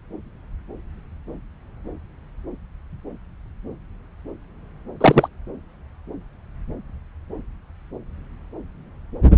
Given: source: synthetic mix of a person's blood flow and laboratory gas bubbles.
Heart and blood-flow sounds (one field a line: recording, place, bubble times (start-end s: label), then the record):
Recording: Doppler ultrasound of blood flow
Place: subclavian vein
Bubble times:
5.00-5.28 s: bubbles
From the record:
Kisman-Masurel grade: 113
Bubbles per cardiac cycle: 1 to 2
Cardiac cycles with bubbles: 1 to 10%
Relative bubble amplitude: loud (0.450 to 0.775)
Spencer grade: 1 (occasional bubble signal discernible with the cardiac motion signal, with majority of cardiac periods free of bubbles)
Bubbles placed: anywhere in the cardiac cycle